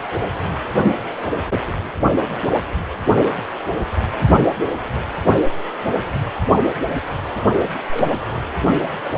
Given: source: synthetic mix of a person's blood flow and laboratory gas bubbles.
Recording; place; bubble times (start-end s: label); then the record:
Doppler ultrasound of blood flow; precordium
7.91-8.11 s: bubbles
8.21-8.26 s: bubbles
8.31-8.35 s: bubbles
From the record:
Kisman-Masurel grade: 211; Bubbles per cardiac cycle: several, 3 to 8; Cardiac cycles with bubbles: 1 to 10%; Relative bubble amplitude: barely perceptible (0.100 to 0.250); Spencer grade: 1 (occasional bubble signal discernible with the cardiac motion signal, with majority of cardiac periods free of bubbles); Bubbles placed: only in the low amplitude regions of the cardiac cycle